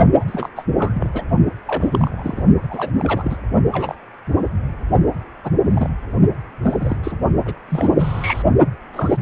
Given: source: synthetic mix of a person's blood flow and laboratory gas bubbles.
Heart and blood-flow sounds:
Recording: Doppler ultrasound of blood flow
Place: precordium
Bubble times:
0.20-0.24 s: bubbles
0.27-0.49 s: bubbles
0.55-0.65 s: bubbles
0.77-1.08 s: bubbles
1.14-1.23 s: bubbles
1.67-2.43 s: bubbles
2.62-2.92 s: bubbles
2.99-3.37 s: bubbles
3.72-3.95 s: bubbles
5.43-5.50 s: bubbles
5.68-5.89 s: bubbles
6.62-6.97 s: bubbles
7.04-7.15 s: bubbles
7.45-7.54 s: bubbles
7.69-8.44 s: bubbles
8.93-9.18 s: bubbles
From the record:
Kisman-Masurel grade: 242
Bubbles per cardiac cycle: several, 3 to 8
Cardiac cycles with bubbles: 100%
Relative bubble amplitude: moderate (0.250 to 0.450)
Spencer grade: 3 (all of the cardiac periods contain showers or single bubble signals, but not dominating or overriding the cardiac motion signals)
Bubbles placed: only in the low amplitude regions of the cardiac cycle

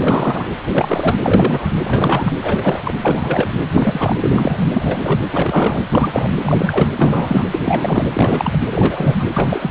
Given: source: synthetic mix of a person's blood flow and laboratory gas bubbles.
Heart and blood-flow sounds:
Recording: Doppler ultrasound of blood flow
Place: precordium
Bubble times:
0.00-0.50 s: bubbles
0.71-1.18 s: bubbles
1.23-1.70 s: bubbles
1.84-2.35 s: bubbles
2.40-2.94 s: bubbles
3.01-3.50 s: bubbles
3.66-4.17 s: bubbles
4.23-4.69 s: bubbles
4.73-5.26 s: bubbles
5.32-5.83 s: bubbles
5.89-6.32 s: bubbles
6.43-6.90 s: bubbles
6.97-7.46 s: bubbles
7.51-7.60 s: bubbles
7.62-8.08 s: bubbles
8.14-8.58 s: bubbles
8.72-9.23 s: bubbles
9.33-9.71 s: bubbles
From the record:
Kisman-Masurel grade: 343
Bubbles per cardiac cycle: rolling drumbeat, 9 or more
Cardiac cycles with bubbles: 100%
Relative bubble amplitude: loud (0.450 to 0.775)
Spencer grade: 3 (all of the cardiac periods contain showers or single bubble signals, but not dominating or overriding the cardiac motion signals)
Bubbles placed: anywhere in the cardiac cycle

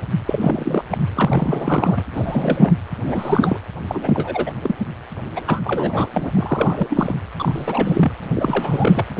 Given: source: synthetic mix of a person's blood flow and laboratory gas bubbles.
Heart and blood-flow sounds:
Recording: Doppler ultrasound of blood flow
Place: precordium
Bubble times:
0.26-0.84 s: bubbles
0.90-0.98 s: bubbles
1.14-2.03 s: bubbles
2.12-2.74 s: bubbles
3.03-3.61 s: bubbles
3.89-4.51 s: bubbles
4.62-4.75 s: bubbles
5.36-5.42 s: bubbles
5.46-5.61 s: bubbles
5.64-6.08 s: bubbles
6.13-6.88 s: bubbles
6.90-7.15 s: bubbles
7.40-8.12 s: bubbles
8.33-9.05 s: bubbles
9.15-9.20 s: bubbles
From the record:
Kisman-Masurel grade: 342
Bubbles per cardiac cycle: rolling drumbeat, 9 or more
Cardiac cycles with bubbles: 100%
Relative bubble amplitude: moderate (0.250 to 0.450)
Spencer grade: 3 (all of the cardiac periods contain showers or single bubble signals, but not dominating or overriding the cardiac motion signals)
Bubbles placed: anywhere in the cardiac cycle

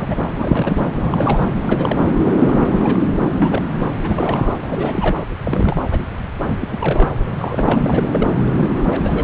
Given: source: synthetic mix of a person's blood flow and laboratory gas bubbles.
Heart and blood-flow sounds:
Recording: Doppler ultrasound of blood flow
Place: subclavian vein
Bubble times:
0.00-0.23 s: bubbles
0.35-0.90 s: bubbles
0.96-1.46 s: bubbles
1.54-1.60 s: bubbles
1.62-2.02 s: bubbles
2.26-2.31 s: bubbles
2.40-3.06 s: bubbles
3.20-3.29 s: bubbles
3.40-3.62 s: bubbles
3.78-3.88 s: bubbles
4.02-4.55 s: bubbles
4.62-5.17 s: bubbles
5.43-5.81 s: bubbles
5.90-6.06 s: bubbles
6.46-7.08 s: bubbles
7.25-7.30 s: bubbles
7.38-8.09 s: bubbles
8.12-8.28 s: bubbles
8.55-8.69 s: bubbles
8.75-9.24 s: bubbles
From the record:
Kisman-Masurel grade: 342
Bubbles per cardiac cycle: rolling drumbeat, 9 or more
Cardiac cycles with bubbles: 100%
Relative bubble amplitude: moderate (0.250 to 0.450)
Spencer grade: 3 (all of the cardiac periods contain showers or single bubble signals, but not dominating or overriding the cardiac motion signals)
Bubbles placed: anywhere in the cardiac cycle

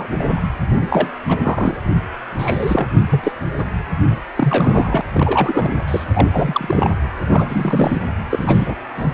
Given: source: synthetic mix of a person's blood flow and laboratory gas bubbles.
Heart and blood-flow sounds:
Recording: Doppler ultrasound of blood flow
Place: precordium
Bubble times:
0.00-0.06 s: bubbles
0.09-0.40 s: bubbles
0.74-1.11 s: bubbles
1.25-1.80 s: bubbles
2.38-2.88 s: bubbles
3.10-3.32 s: bubbles
3.57-3.66 s: bubbles
4.08-4.18 s: bubbles
4.35-5.01 s: bubbles
5.14-5.75 s: bubbles
5.88-6.04 s: bubbles
6.13-6.29 s: bubbles
6.32-6.94 s: bubbles
7.30-7.99 s: bubbles
8.30-8.75 s: bubbles
8.96-9.05 s: bubbles
From the record:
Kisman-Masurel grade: 342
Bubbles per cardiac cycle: rolling drumbeat, 9 or more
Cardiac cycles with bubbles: 100%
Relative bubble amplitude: moderate (0.250 to 0.450)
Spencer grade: 3 (all of the cardiac periods contain showers or single bubble signals, but not dominating or overriding the cardiac motion signals)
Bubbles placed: anywhere in the cardiac cycle

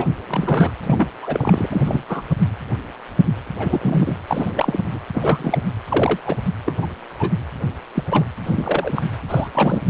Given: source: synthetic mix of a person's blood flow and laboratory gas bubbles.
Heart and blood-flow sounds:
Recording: Doppler ultrasound of blood flow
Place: precordium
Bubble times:
0.00-0.06 s: bubbles
0.28-0.71 s: bubbles
0.86-1.09 s: bubbles
1.22-1.69 s: bubbles
1.71-2.03 s: bubbles
2.09-2.23 s: bubbles
3.59-4.16 s: bubbles
4.27-4.80 s: bubbles
4.90-5.00 s: bubbles
5.13-5.58 s: bubbles
5.88-6.18 s: bubbles
6.26-6.37 s: bubbles
6.66-6.74 s: bubbles
6.82-6.87 s: bubbles
7.18-7.30 s: bubbles
7.95-8.04 s: bubbles
8.10-8.25 s: bubbles
8.45-9.03 s: bubbles
9.28-9.50 s: bubbles
9.54-9.82 s: bubbles
From the record:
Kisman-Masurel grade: 232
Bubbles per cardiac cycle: several, 3 to 8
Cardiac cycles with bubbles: 50 to 99%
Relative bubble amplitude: moderate (0.250 to 0.450)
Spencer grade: 3 (all of the cardiac periods contain showers or single bubble signals, but not dominating or overriding the cardiac motion signals)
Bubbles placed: anywhere in the cardiac cycle

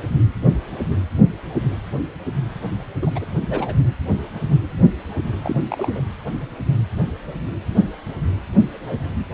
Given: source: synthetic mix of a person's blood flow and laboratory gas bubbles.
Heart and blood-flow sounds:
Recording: Doppler ultrasound of blood flow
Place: precordium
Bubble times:
3.02-3.10 s: bubbles
3.15-3.26 s: bubbles
3.49-3.74 s: bubbles
5.43-5.57 s: bubbles
5.69-6.00 s: bubbles
From the record:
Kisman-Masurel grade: 222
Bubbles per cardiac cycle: several, 3 to 8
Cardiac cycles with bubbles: 10 to 50%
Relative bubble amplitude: moderate (0.250 to 0.450)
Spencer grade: 2 (many but less than half of the cardiac periods contain bubble signals, singularly or in groups)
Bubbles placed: anywhere in the cardiac cycle

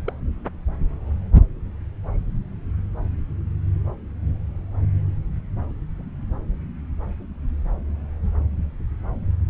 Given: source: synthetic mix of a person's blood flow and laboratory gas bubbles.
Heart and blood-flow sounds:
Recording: Doppler ultrasound of blood flow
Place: subclavian vein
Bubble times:
0.05-0.13 s: bubbles
From the record:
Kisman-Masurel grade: 111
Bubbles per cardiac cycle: 1 to 2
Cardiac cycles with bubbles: 1 to 10%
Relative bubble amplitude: barely perceptible (0.100 to 0.250)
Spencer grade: 1 (occasional bubble signal discernible with the cardiac motion signal, with majority of cardiac periods free of bubbles)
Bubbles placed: anywhere in the cardiac cycle

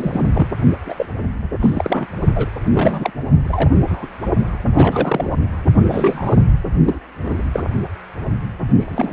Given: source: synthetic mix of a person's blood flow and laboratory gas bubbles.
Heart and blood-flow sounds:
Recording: Doppler ultrasound of blood flow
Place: precordium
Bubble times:
0.00-0.22 s: bubbles
0.33-0.47 s: bubbles
0.85-0.94 s: bubbles
0.97-1.06 s: bubbles
1.60-2.07 s: bubbles
2.35-2.50 s: bubbles
2.74-3.11 s: bubbles
3.44-3.70 s: bubbles
3.87-4.07 s: bubbles
4.75-5.33 s: bubbles
5.89-6.37 s: bubbles
6.84-7.00 s: bubbles
7.25-7.42 s: bubbles
7.53-7.63 s: bubbles
8.78-9.13 s: bubbles
From the record:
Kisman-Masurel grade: 242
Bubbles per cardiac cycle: several, 3 to 8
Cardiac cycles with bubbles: 100%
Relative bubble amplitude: moderate (0.250 to 0.450)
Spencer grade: 3 (all of the cardiac periods contain showers or single bubble signals, but not dominating or overriding the cardiac motion signals)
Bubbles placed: only in the low amplitude regions of the cardiac cycle

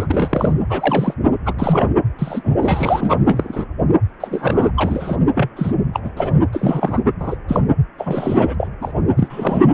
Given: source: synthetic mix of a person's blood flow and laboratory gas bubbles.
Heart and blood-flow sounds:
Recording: Doppler ultrasound of blood flow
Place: precordium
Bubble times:
0.00-0.07 s: bubbles
0.10-0.53 s: bubbles
0.70-1.14 s: bubbles
1.45-1.53 s: bubbles
1.58-1.86 s: bubbles
2.19-2.57 s: bubbles
2.60-3.17 s: bubbles
3.25-3.66 s: bubbles
4.20-4.71 s: bubbles
4.77-5.17 s: bubbles
5.34-5.50 s: bubbles
5.56-5.73 s: bubbles
5.94-6.00 s: bubbles
6.04-6.09 s: bubbles
6.17-6.34 s: bubbles
6.52-6.99 s: bubbles
7.20-7.36 s: bubbles
7.48-7.60 s: bubbles
7.97-8.55 s: bubbles
8.60-8.68 s: bubbles
8.81-8.93 s: bubbles
9.17-9.64 s: bubbles
From the record:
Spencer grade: 3 (all of the cardiac periods contain showers or single bubble signals, but not dominating or overriding the cardiac motion signals)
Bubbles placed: anywhere in the cardiac cycle

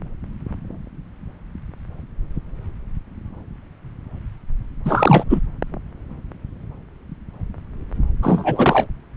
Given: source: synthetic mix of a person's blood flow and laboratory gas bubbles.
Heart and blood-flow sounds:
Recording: Doppler ultrasound of blood flow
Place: subclavian vein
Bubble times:
4.85-5.24 s: bubbles
5.29-5.41 s: bubbles
8.22-8.86 s: bubbles
From the record:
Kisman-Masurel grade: 213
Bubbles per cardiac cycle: several, 3 to 8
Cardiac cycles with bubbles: 1 to 10%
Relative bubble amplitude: loud (0.450 to 0.775)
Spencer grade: 1 (occasional bubble signal discernible with the cardiac motion signal, with majority of cardiac periods free of bubbles)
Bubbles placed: anywhere in the cardiac cycle

